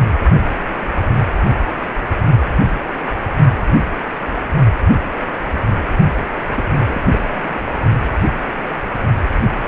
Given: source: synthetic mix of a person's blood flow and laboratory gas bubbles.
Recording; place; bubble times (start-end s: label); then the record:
Doppler ultrasound of blood flow; precordium
6.56-7.02 s: bubbles
7.11-7.19 s: bubbles
7.30-7.59 s: bubbles
From the record:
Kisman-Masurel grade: 211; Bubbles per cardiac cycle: several, 3 to 8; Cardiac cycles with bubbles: 1 to 10%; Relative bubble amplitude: barely perceptible (0.100 to 0.250); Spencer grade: 1 (occasional bubble signal discernible with the cardiac motion signal, with majority of cardiac periods free of bubbles); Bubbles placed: only in the low amplitude regions of the cardiac cycle